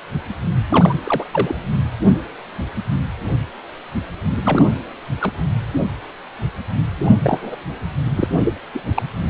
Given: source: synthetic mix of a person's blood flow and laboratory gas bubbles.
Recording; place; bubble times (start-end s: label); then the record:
Doppler ultrasound of blood flow; precordium
0.69-0.94 s: bubbles
1.04-1.24 s: bubbles
1.31-1.55 s: bubbles
4.42-4.67 s: bubbles
5.21-5.31 s: bubbles
7.05-7.17 s: bubbles
7.22-7.57 s: bubbles
8.15-8.28 s: bubbles
8.45-8.53 s: bubbles
8.73-8.82 s: bubbles
8.94-9.03 s: bubbles
From the record:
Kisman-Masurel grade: 222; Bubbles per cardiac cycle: several, 3 to 8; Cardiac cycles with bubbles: 10 to 50%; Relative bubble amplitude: moderate (0.250 to 0.450); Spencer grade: 2 (many but less than half of the cardiac periods contain bubble signals, singularly or in groups); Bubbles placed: anywhere in the cardiac cycle